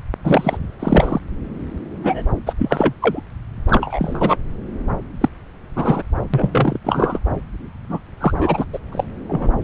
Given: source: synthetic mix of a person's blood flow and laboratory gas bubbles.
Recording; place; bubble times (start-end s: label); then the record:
Doppler ultrasound of blood flow; subclavian vein
0.24-0.58 s: bubbles
0.79-1.20 s: bubbles
2.04-2.22 s: bubbles
2.46-2.54 s: bubbles
2.58-2.94 s: bubbles
3.02-3.21 s: bubbles
3.69-4.37 s: bubbles
5.21-5.29 s: bubbles
5.76-6.03 s: bubbles
6.34-6.78 s: bubbles
6.84-7.19 s: bubbles
7.89-7.99 s: bubbles
8.21-8.34 s: bubbles
8.36-8.65 s: bubbles
8.72-8.79 s: bubbles
8.92-9.04 s: bubbles
9.28-9.48 s: bubbles
9.61-9.64 s: bubbles
From the record:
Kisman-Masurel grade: 243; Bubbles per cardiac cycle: several, 3 to 8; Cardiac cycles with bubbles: 100%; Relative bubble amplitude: loud (0.450 to 0.775); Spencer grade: 3 (all of the cardiac periods contain showers or single bubble signals, but not dominating or overriding the cardiac motion signals); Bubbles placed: anywhere in the cardiac cycle